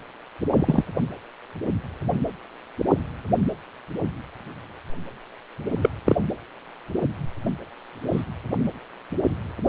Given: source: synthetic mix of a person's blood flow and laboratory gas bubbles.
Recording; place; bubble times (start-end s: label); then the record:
Doppler ultrasound of blood flow; precordium
0.55-0.84 s: bubbles
5.69-5.94 s: bubbles
6.04-6.16 s: bubbles
8.12-8.23 s: bubbles
From the record:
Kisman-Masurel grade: 122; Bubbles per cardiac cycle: 1 to 2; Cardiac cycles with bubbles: 10 to 50%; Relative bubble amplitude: moderate (0.250 to 0.450); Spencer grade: 2 (many but less than half of the cardiac periods contain bubble signals, singularly or in groups); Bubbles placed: anywhere in the cardiac cycle